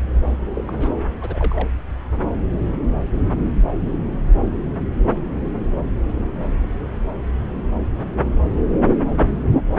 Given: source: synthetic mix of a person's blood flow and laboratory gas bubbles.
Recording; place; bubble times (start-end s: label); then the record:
Doppler ultrasound of blood flow; subclavian vein
0.54-0.73 s: bubbles
0.78-0.92 s: bubbles
1.21-1.69 s: bubbles
From the record:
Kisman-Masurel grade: 211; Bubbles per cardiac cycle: several, 3 to 8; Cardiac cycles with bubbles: 1 to 10%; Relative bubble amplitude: barely perceptible (0.100 to 0.250); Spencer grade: 1 (occasional bubble signal discernible with the cardiac motion signal, with majority of cardiac periods free of bubbles); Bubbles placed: anywhere in the cardiac cycle